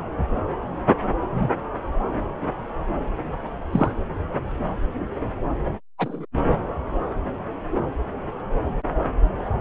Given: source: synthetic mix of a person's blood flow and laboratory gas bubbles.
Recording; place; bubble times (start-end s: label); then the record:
Doppler ultrasound of blood flow; subclavian vein
1.32-1.49 s: bubbles
3.71-3.91 s: bubbles
5.98-6.25 s: bubbles
From the record:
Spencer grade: 2 (many but less than half of the cardiac periods contain bubble signals, singularly or in groups); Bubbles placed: anywhere in the cardiac cycle